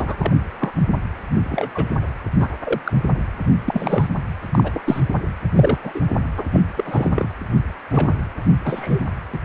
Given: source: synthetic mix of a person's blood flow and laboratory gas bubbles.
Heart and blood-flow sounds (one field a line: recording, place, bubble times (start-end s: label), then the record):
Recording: Doppler ultrasound of blood flow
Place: precordium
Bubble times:
0.00-0.32 s: bubbles
0.59-0.73 s: bubbles
1.43-1.97 s: bubbles
2.40-2.49 s: bubbles
2.64-2.81 s: bubbles
2.84-2.93 s: bubbles
3.66-4.08 s: bubbles
4.51-5.01 s: bubbles
5.52-5.79 s: bubbles
5.83-6.00 s: bubbles
6.36-6.46 s: bubbles
6.52-6.60 s: bubbles
6.76-7.30 s: bubbles
7.90-8.13 s: bubbles
8.64-9.03 s: bubbles
9.33-9.38 s: bubbles
From the record:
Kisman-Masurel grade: 233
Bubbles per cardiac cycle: several, 3 to 8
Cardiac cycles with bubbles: 50 to 99%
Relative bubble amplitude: loud (0.450 to 0.775)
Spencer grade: 3 (all of the cardiac periods contain showers or single bubble signals, but not dominating or overriding the cardiac motion signals)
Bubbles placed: anywhere in the cardiac cycle